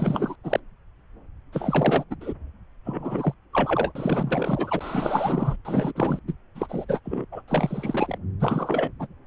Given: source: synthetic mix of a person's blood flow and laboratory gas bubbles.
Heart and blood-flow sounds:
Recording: Doppler ultrasound of blood flow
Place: subclavian vein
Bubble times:
0.00-0.35 s: bubbles
0.44-0.59 s: bubbles
1.53-2.04 s: bubbles
2.10-2.15 s: bubbles
2.21-2.33 s: bubbles
2.85-3.34 s: bubbles
3.53-3.92 s: bubbles
3.95-5.57 s: bubbles
5.65-5.92 s: bubbles
5.95-6.19 s: bubbles
6.28-6.33 s: bubbles
6.55-6.67 s: bubbles
6.70-6.85 s: bubbles
6.88-6.99 s: bubbles
7.05-7.25 s: bubbles
7.32-7.42 s: bubbles
7.47-8.17 s: bubbles
8.39-8.92 s: bubbles
8.99-9.07 s: bubbles
From the record:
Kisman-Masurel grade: 332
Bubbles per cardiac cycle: rolling drumbeat, 9 or more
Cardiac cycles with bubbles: 50 to 99%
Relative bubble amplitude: moderate (0.250 to 0.450)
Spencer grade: 3 (all of the cardiac periods contain showers or single bubble signals, but not dominating or overriding the cardiac motion signals)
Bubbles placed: anywhere in the cardiac cycle

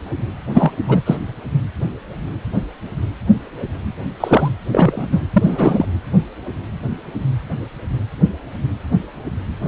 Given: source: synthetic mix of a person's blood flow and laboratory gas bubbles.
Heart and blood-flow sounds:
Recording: Doppler ultrasound of blood flow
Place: precordium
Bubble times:
0.53-0.72 s: bubbles
0.86-1.01 s: bubbles
1.05-1.17 s: bubbles
4.20-4.48 s: bubbles
4.71-5.07 s: bubbles
5.11-5.23 s: bubbles
5.33-5.85 s: bubbles
9.64-9.68 s: bubbles
From the record:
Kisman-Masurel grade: 223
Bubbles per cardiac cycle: several, 3 to 8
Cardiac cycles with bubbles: 10 to 50%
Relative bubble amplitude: loud (0.450 to 0.775)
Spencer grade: 2 (many but less than half of the cardiac periods contain bubble signals, singularly or in groups)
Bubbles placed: anywhere in the cardiac cycle

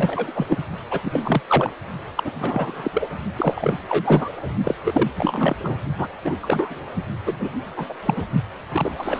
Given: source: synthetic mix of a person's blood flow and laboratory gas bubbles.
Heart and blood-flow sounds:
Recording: Doppler ultrasound of blood flow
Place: precordium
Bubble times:
0.00-0.32 s: bubbles
0.35-0.64 s: bubbles
0.90-1.00 s: bubbles
1.02-1.42 s: bubbles
1.48-1.73 s: bubbles
2.17-2.31 s: bubbles
2.40-2.91 s: bubbles
2.94-3.06 s: bubbles
3.35-3.77 s: bubbles
3.89-4.29 s: bubbles
4.64-4.75 s: bubbles
4.84-5.11 s: bubbles
5.16-5.55 s: bubbles
5.62-5.76 s: bubbles
5.98-6.07 s: bubbles
6.24-6.37 s: bubbles
6.42-6.92 s: bubbles
7.26-7.36 s: bubbles
7.39-7.49 s: bubbles
7.76-7.86 s: bubbles
7.89-7.93 s: bubbles
8.05-8.23 s: bubbles
8.71-8.92 s: bubbles
8.98-9.20 s: bubbles
From the record:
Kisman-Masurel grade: 342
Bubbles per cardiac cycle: rolling drumbeat, 9 or more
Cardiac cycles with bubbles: 100%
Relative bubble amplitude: moderate (0.250 to 0.450)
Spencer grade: 3 (all of the cardiac periods contain showers or single bubble signals, but not dominating or overriding the cardiac motion signals)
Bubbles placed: only in the low amplitude regions of the cardiac cycle

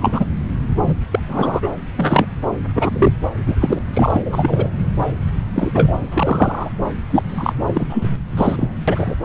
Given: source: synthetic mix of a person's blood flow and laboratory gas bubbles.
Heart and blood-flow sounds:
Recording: Doppler ultrasound of blood flow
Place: subclavian vein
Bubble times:
0.01-0.25 s: bubbles
0.82-0.95 s: bubbles
1.11-1.20 s: bubbles
1.28-1.74 s: bubbles
1.97-2.27 s: bubbles
2.75-3.12 s: bubbles
3.46-3.56 s: bubbles
3.61-3.79 s: bubbles
3.93-4.21 s: bubbles
4.25-4.71 s: bubbles
5.55-6.07 s: bubbles
6.11-6.70 s: bubbles
7.11-7.22 s: bubbles
7.28-7.53 s: bubbles
7.67-8.10 s: bubbles
8.37-8.74 s: bubbles
8.88-9.15 s: bubbles
From the record:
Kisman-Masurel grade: 343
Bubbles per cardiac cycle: rolling drumbeat, 9 or more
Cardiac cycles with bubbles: 100%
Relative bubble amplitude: loud (0.450 to 0.775)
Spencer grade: 3 (all of the cardiac periods contain showers or single bubble signals, but not dominating or overriding the cardiac motion signals)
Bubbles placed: anywhere in the cardiac cycle

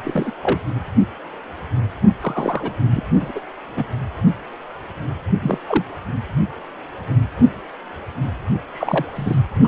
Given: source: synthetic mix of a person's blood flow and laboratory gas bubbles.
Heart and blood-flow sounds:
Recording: Doppler ultrasound of blood flow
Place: precordium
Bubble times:
0.03-0.33 s: bubbles
0.41-0.60 s: bubbles
2.21-2.78 s: bubbles
2.91-3.04 s: bubbles
3.20-3.40 s: bubbles
3.77-3.85 s: bubbles
5.42-5.59 s: bubbles
5.68-5.84 s: bubbles
8.74-9.39 s: bubbles
9.63-9.68 s: bubbles
From the record:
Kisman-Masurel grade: 222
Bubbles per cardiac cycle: several, 3 to 8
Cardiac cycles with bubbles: 10 to 50%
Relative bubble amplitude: moderate (0.250 to 0.450)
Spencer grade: 2 (many but less than half of the cardiac periods contain bubble signals, singularly or in groups)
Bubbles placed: anywhere in the cardiac cycle

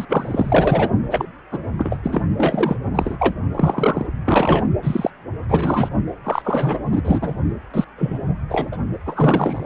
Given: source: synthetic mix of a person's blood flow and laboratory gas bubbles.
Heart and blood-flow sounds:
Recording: Doppler ultrasound of blood flow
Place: precordium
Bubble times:
0.00-0.05 s: bubbles
0.09-0.91 s: bubbles
1.10-1.31 s: bubbles
1.51-1.59 s: bubbles
1.78-1.99 s: bubbles
2.04-2.25 s: bubbles
2.38-2.77 s: bubbles
2.94-3.35 s: bubbles
3.55-4.07 s: bubbles
4.25-4.67 s: bubbles
4.82-5.11 s: bubbles
5.49-5.89 s: bubbles
6.24-6.83 s: bubbles
6.92-7.02 s: bubbles
7.04-7.34 s: bubbles
7.74-7.84 s: bubbles
7.98-8.19 s: bubbles
8.49-8.68 s: bubbles
8.71-8.77 s: bubbles
9.05-9.63 s: bubbles
From the record:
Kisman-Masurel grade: 243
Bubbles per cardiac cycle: several, 3 to 8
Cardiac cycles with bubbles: 100%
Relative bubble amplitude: loud (0.450 to 0.775)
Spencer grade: 3 (all of the cardiac periods contain showers or single bubble signals, but not dominating or overriding the cardiac motion signals)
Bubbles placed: anywhere in the cardiac cycle

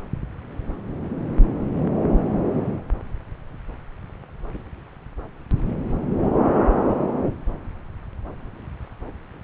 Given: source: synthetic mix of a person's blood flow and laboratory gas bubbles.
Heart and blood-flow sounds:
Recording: Doppler ultrasound of blood flow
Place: subclavian vein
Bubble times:
4.54-4.62 s: bubbles
From the record:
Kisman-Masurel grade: 111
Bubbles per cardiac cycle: 1 to 2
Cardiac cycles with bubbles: 1 to 10%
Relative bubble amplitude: barely perceptible (0.100 to 0.250)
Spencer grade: 1 (occasional bubble signal discernible with the cardiac motion signal, with majority of cardiac periods free of bubbles)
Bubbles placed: anywhere in the cardiac cycle

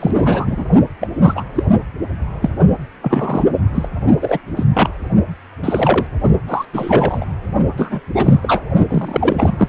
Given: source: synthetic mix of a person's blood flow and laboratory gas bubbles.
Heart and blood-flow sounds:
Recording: Doppler ultrasound of blood flow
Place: precordium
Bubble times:
0.00-0.66 s: bubbles
1.00-1.08 s: bubbles
1.21-1.44 s: bubbles
1.54-1.63 s: bubbles
2.42-2.49 s: bubbles
3.01-3.44 s: bubbles
3.74-3.89 s: bubbles
4.22-4.39 s: bubbles
4.56-4.64 s: bubbles
4.75-4.89 s: bubbles
5.63-6.07 s: bubbles
6.48-6.65 s: bubbles
6.73-7.25 s: bubbles
7.77-8.00 s: bubbles
8.14-8.62 s: bubbles
8.89-9.68 s: bubbles
From the record:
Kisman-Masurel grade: 243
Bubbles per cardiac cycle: several, 3 to 8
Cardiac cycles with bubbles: 100%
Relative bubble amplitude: loud (0.450 to 0.775)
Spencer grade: 3 (all of the cardiac periods contain showers or single bubble signals, but not dominating or overriding the cardiac motion signals)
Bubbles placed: only in the low amplitude regions of the cardiac cycle

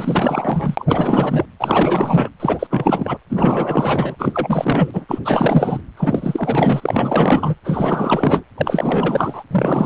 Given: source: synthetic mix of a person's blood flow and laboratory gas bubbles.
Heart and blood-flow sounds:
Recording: Doppler ultrasound of blood flow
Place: precordium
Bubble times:
0.00-1.46 s: bubbles
1.60-2.29 s: bubbles
2.40-2.67 s: bubbles
2.70-3.17 s: bubbles
3.29-4.16 s: bubbles
4.18-5.05 s: bubbles
5.08-5.20 s: bubbles
5.25-5.80 s: bubbles
5.97-7.54 s: bubbles
7.64-8.44 s: bubbles
8.58-9.44 s: bubbles
9.51-9.86 s: bubbles
From the record:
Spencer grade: 4 (maximum detectable bubble signal sounding continuously throughout systole and diastole of every cardiac period, and overriding the amplitude of the normal cardiac signals)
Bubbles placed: anywhere in the cardiac cycle

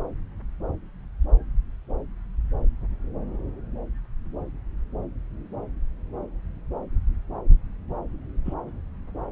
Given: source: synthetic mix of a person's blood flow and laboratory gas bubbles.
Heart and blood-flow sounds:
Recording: Doppler ultrasound of blood flow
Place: subclavian vein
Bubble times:
8.45-8.54 s: bubbles
From the record:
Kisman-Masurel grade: 111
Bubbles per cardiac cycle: 1 to 2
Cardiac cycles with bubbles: 1 to 10%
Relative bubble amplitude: barely perceptible (0.100 to 0.250)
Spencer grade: 1 (occasional bubble signal discernible with the cardiac motion signal, with majority of cardiac periods free of bubbles)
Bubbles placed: anywhere in the cardiac cycle

